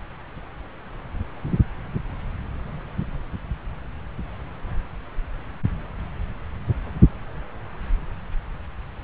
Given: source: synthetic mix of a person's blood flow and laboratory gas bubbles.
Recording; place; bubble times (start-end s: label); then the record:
Doppler ultrasound of blood flow; subclavian vein
no bubbles
From the record:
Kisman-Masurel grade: 000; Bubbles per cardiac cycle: 0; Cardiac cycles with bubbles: 0%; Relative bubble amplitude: no bubbles discernible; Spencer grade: 0 (complete lack of bubble signals)